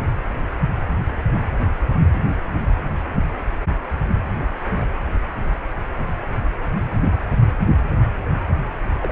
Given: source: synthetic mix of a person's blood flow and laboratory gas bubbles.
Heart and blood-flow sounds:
Doppler ultrasound of blood flow; precordium
9.01-9.12 s: bubbles
From the record:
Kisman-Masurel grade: 212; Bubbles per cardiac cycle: several, 3 to 8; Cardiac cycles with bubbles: 1 to 10%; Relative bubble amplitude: moderate (0.250 to 0.450); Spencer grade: 1 (occasional bubble signal discernible with the cardiac motion signal, with majority of cardiac periods free of bubbles); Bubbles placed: only in the low amplitude regions of the cardiac cycle

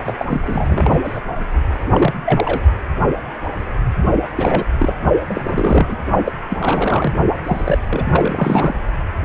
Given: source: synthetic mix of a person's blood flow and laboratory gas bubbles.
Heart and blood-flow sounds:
Doppler ultrasound of blood flow; precordium
0.06-0.14 s: bubbles
0.18-1.02 s: bubbles
1.04-1.21 s: bubbles
1.93-2.13 s: bubbles
2.25-2.62 s: bubbles
4.35-4.64 s: bubbles
4.78-4.94 s: bubbles
5.29-5.95 s: bubbles
6.24-6.32 s: bubbles
6.49-7.13 s: bubbles
7.44-7.78 s: bubbles
7.89-8.73 s: bubbles
From the record:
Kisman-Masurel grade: 332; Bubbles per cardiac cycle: rolling drumbeat, 9 or more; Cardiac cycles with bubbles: 50 to 99%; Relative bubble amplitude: moderate (0.250 to 0.450); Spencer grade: 3 (all of the cardiac periods contain showers or single bubble signals, but not dominating or overriding the cardiac motion signals); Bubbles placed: only in the low amplitude regions of the cardiac cycle

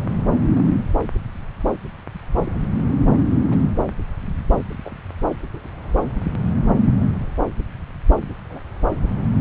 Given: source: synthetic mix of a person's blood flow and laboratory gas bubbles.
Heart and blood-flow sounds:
Doppler ultrasound of blood flow; subclavian vein
0.54-0.65 s: bubbles
2.46-2.52 s: bubbles
3.50-3.59 s: bubbles
4.57-4.63 s: bubbles
4.83-4.92 s: bubbles
5.54-5.59 s: bubbles
5.64-5.67 s: bubbles
6.81-6.88 s: bubbles
7.15-7.18 s: bubbles
8.49-8.61 s: bubbles
From the record:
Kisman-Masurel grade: 121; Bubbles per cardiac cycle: 1 to 2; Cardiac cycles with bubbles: 10 to 50%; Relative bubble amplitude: barely perceptible (0.100 to 0.250); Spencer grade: 2 (many but less than half of the cardiac periods contain bubble signals, singularly or in groups); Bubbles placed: anywhere in the cardiac cycle

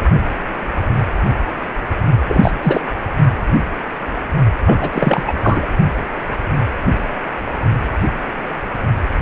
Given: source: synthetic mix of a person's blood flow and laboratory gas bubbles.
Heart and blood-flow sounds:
Doppler ultrasound of blood flow; precordium
2.28-2.51 s: bubbles
2.62-2.81 s: bubbles
4.65-4.89 s: bubbles
4.92-5.24 s: bubbles
5.26-5.34 s: bubbles
5.39-5.67 s: bubbles
From the record:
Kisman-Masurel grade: 223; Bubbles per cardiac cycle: several, 3 to 8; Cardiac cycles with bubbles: 10 to 50%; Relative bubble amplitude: loud (0.450 to 0.775); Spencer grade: 2 (many but less than half of the cardiac periods contain bubble signals, singularly or in groups); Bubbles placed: only in the low amplitude regions of the cardiac cycle

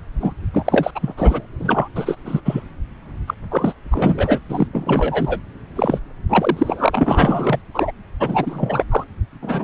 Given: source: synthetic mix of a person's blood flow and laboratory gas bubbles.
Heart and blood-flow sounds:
Doppler ultrasound of blood flow; subclavian vein
0.20-0.33 s: bubbles
0.54-0.91 s: bubbles
0.95-1.14 s: bubbles
1.17-1.46 s: bubbles
1.59-1.89 s: bubbles
1.95-2.17 s: bubbles
2.25-2.40 s: bubbles
2.45-2.61 s: bubbles
3.27-3.35 s: bubbles
3.50-3.73 s: bubbles
3.91-4.39 s: bubbles
4.49-4.67 s: bubbles
4.72-5.40 s: bubbles
5.75-5.99 s: bubbles
6.29-7.62 s: bubbles
7.74-7.91 s: bubbles
8.20-8.84 s: bubbles
8.91-9.05 s: bubbles
9.42-9.64 s: bubbles
From the record:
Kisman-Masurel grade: 343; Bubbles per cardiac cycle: rolling drumbeat, 9 or more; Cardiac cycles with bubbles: 100%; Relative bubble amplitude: loud (0.450 to 0.775); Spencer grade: 3 (all of the cardiac periods contain showers or single bubble signals, but not dominating or overriding the cardiac motion signals); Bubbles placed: anywhere in the cardiac cycle

